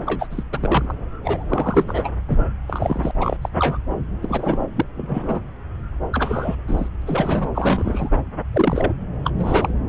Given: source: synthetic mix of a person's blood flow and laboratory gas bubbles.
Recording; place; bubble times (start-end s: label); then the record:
Doppler ultrasound of blood flow; subclavian vein
0.05-0.44 s: bubbles
0.52-0.94 s: bubbles
1.24-1.43 s: bubbles
1.48-2.10 s: bubbles
2.29-2.38 s: bubbles
2.68-3.11 s: bubbles
3.20-3.37 s: bubbles
3.42-3.49 s: bubbles
3.58-3.78 s: bubbles
4.21-4.66 s: bubbles
4.75-4.82 s: bubbles
4.97-5.42 s: bubbles
6.12-6.56 s: bubbles
6.67-6.89 s: bubbles
7.02-7.47 s: bubbles
7.54-8.09 s: bubbles
8.53-8.95 s: bubbles
9.24-9.31 s: bubbles
9.38-9.70 s: bubbles
From the record:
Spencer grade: 3 (all of the cardiac periods contain showers or single bubble signals, but not dominating or overriding the cardiac motion signals); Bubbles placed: anywhere in the cardiac cycle